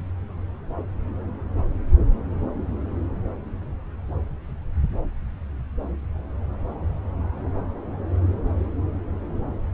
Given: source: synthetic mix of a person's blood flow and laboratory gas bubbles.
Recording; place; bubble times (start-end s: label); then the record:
Doppler ultrasound of blood flow; subclavian vein
no bubbles
From the record:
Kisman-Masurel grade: 000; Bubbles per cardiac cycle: 0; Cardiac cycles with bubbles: 0%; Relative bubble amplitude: no bubbles discernible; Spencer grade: 0 (complete lack of bubble signals)